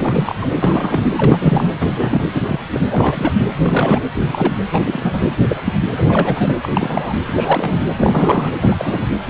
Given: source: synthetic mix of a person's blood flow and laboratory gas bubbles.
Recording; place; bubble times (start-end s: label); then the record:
Doppler ultrasound of blood flow; precordium
0.00-0.35 s: bubbles
0.41-0.48 s: bubbles
0.56-1.10 s: bubbles
1.17-1.68 s: bubbles
1.80-2.25 s: bubbles
2.34-2.41 s: bubbles
2.46-2.59 s: bubbles
2.72-2.81 s: bubbles
2.88-3.32 s: bubbles
3.62-4.00 s: bubbles
4.20-4.54 s: bubbles
4.71-5.25 s: bubbles
5.48-5.60 s: bubbles
5.64-5.72 s: bubbles
5.96-6.54 s: bubbles
6.62-7.18 s: bubbles
7.26-7.84 s: bubbles
7.96-8.52 s: bubbles
8.61-9.07 s: bubbles
9.27-9.30 s: bubbles
From the record:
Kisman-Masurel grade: 243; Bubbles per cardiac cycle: several, 3 to 8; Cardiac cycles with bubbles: 100%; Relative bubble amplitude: loud (0.450 to 0.775); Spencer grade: 3 (all of the cardiac periods contain showers or single bubble signals, but not dominating or overriding the cardiac motion signals); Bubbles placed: anywhere in the cardiac cycle